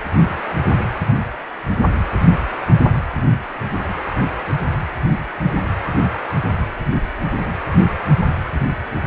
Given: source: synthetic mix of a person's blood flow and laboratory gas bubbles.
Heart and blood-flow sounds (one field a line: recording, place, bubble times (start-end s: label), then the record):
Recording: Doppler ultrasound of blood flow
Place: precordium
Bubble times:
no bubbles
From the record:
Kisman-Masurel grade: 000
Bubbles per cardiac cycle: 0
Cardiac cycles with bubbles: 0%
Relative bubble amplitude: no bubbles discernible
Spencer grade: 0 (complete lack of bubble signals)